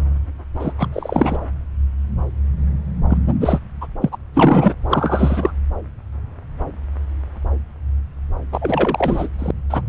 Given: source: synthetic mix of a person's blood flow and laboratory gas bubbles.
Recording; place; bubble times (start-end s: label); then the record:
Doppler ultrasound of blood flow; subclavian vein
0.59-0.73 s: bubbles
0.77-0.89 s: bubbles
0.92-1.39 s: bubbles
3.10-3.18 s: bubbles
3.27-3.33 s: bubbles
3.40-3.59 s: bubbles
3.81-3.87 s: bubbles
4.01-4.09 s: bubbles
4.12-4.17 s: bubbles
4.33-4.74 s: bubbles
4.89-5.52 s: bubbles
8.52-9.28 s: bubbles
9.38-9.51 s: bubbles
9.70-9.82 s: bubbles
From the record:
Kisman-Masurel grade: 333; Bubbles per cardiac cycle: rolling drumbeat, 9 or more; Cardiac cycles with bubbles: 50 to 99%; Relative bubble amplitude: loud (0.450 to 0.775); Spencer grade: 3 (all of the cardiac periods contain showers or single bubble signals, but not dominating or overriding the cardiac motion signals); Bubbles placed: anywhere in the cardiac cycle